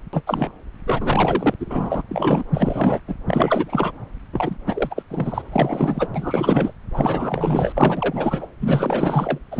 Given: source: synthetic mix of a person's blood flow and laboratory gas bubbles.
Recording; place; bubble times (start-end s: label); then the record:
Doppler ultrasound of blood flow; subclavian vein
0.13-0.22 s: bubbles
0.26-0.52 s: bubbles
0.86-1.54 s: bubbles
1.59-2.03 s: bubbles
2.11-2.44 s: bubbles
2.53-3.00 s: bubbles
3.08-3.15 s: bubbles
3.27-3.92 s: bubbles
4.33-4.57 s: bubbles
4.67-5.03 s: bubbles
5.10-6.09 s: bubbles
6.14-6.74 s: bubbles
6.94-7.73 s: bubbles
7.77-8.48 s: bubbles
8.60-9.38 s: bubbles
9.52-9.60 s: bubbles
From the record:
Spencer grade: 4 (maximum detectable bubble signal sounding continuously throughout systole and diastole of every cardiac period, and overriding the amplitude of the normal cardiac signals); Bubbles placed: anywhere in the cardiac cycle